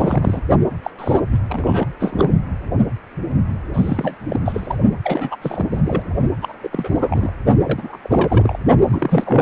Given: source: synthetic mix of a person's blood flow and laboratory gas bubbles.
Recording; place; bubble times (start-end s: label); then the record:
Doppler ultrasound of blood flow; precordium
0.00-0.41 s: bubbles
0.82-0.91 s: bubbles
0.98-1.19 s: bubbles
1.31-1.39 s: bubbles
1.49-1.85 s: bubbles
2.00-2.30 s: bubbles
3.73-4.17 s: bubbles
4.29-4.39 s: bubbles
4.45-4.76 s: bubbles
5.04-5.36 s: bubbles
5.42-5.67 s: bubbles
5.71-6.03 s: bubbles
6.41-6.57 s: bubbles
6.63-6.68 s: bubbles
6.71-7.33 s: bubbles
7.62-7.98 s: bubbles
8.03-8.57 s: bubbles
8.89-9.42 s: bubbles
From the record:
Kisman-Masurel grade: 332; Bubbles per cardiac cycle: rolling drumbeat, 9 or more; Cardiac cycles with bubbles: 50 to 99%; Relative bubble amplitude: moderate (0.250 to 0.450); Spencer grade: 3 (all of the cardiac periods contain showers or single bubble signals, but not dominating or overriding the cardiac motion signals); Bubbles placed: only in the low amplitude regions of the cardiac cycle